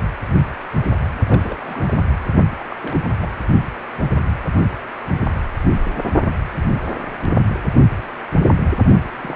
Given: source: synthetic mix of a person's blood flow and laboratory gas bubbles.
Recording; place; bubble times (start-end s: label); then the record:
Doppler ultrasound of blood flow; precordium
1.27-1.99 s: bubbles
2.54-2.65 s: bubbles
2.70-2.76 s: bubbles
2.83-3.01 s: bubbles
3.20-3.30 s: bubbles
9.04-9.11 s: bubbles
9.20-9.36 s: bubbles
From the record:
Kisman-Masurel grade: 221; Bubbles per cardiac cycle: several, 3 to 8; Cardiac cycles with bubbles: 10 to 50%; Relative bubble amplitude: barely perceptible (0.100 to 0.250); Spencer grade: 2 (many but less than half of the cardiac periods contain bubble signals, singularly or in groups); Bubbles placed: only in the low amplitude regions of the cardiac cycle